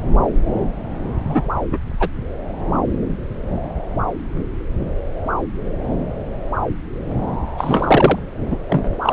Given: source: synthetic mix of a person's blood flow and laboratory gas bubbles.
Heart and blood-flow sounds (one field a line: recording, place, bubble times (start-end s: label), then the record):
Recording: Doppler ultrasound of blood flow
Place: subclavian vein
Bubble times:
1.26-1.43 s: bubbles
1.70-1.78 s: bubbles
1.99-2.09 s: bubbles
7.57-8.20 s: bubbles
8.46-8.58 s: bubbles
8.69-8.96 s: bubbles
9.02-9.13 s: bubbles
From the record:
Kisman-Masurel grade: 223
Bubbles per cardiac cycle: several, 3 to 8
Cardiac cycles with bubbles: 10 to 50%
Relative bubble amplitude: loud (0.450 to 0.775)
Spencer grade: 2 (many but less than half of the cardiac periods contain bubble signals, singularly or in groups)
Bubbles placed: anywhere in the cardiac cycle